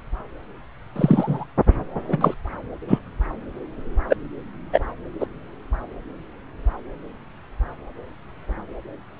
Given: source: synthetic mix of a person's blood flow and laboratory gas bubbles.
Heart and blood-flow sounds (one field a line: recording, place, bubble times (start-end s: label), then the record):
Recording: Doppler ultrasound of blood flow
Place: subclavian vein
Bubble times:
0.96-1.45 s: bubbles
2.08-2.34 s: bubbles
2.88-2.98 s: bubbles
4.09-4.16 s: bubbles
4.72-4.79 s: bubbles
5.20-5.26 s: bubbles
From the record:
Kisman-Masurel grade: 123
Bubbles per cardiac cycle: 1 to 2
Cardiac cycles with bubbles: 10 to 50%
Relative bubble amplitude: loud (0.450 to 0.775)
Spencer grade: 2 (many but less than half of the cardiac periods contain bubble signals, singularly or in groups)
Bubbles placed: anywhere in the cardiac cycle